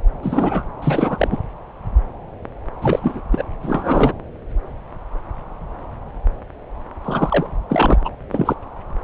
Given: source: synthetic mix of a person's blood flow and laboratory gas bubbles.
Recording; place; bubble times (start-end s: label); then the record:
Doppler ultrasound of blood flow; subclavian vein
0.22-0.64 s: bubbles
0.81-1.37 s: bubbles
2.81-3.21 s: bubbles
3.31-3.44 s: bubbles
3.62-4.12 s: bubbles
7.04-7.46 s: bubbles
7.69-7.98 s: bubbles
8.04-8.10 s: bubbles
8.31-8.54 s: bubbles
From the record:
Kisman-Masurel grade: 223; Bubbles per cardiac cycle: several, 3 to 8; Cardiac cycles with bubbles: 10 to 50%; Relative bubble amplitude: loud (0.450 to 0.775); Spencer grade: 2 (many but less than half of the cardiac periods contain bubble signals, singularly or in groups); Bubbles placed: anywhere in the cardiac cycle